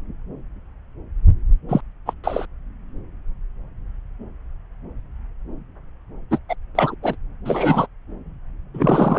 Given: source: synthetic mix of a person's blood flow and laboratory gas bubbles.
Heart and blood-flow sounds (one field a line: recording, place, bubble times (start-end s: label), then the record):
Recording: Doppler ultrasound of blood flow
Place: subclavian vein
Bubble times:
1.69-1.80 s: bubbles
2.06-2.13 s: bubbles
2.23-2.46 s: bubbles
6.30-6.38 s: bubbles
6.49-6.55 s: bubbles
6.75-6.95 s: bubbles
7.03-7.16 s: bubbles
7.45-7.87 s: bubbles
8.74-9.18 s: bubbles
From the record:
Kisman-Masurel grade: 223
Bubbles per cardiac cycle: several, 3 to 8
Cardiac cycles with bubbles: 10 to 50%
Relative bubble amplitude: loud (0.450 to 0.775)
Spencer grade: 2 (many but less than half of the cardiac periods contain bubble signals, singularly or in groups)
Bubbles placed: anywhere in the cardiac cycle